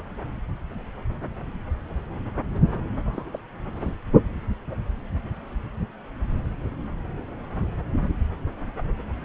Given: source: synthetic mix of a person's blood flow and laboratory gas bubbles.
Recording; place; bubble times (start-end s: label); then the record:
Doppler ultrasound of blood flow; subclavian vein
3.05-3.39 s: bubbles
3.80-3.94 s: bubbles
From the record:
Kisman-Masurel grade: 211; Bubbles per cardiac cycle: several, 3 to 8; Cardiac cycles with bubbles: 1 to 10%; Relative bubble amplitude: barely perceptible (0.100 to 0.250); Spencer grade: 1 (occasional bubble signal discernible with the cardiac motion signal, with majority of cardiac periods free of bubbles); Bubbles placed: anywhere in the cardiac cycle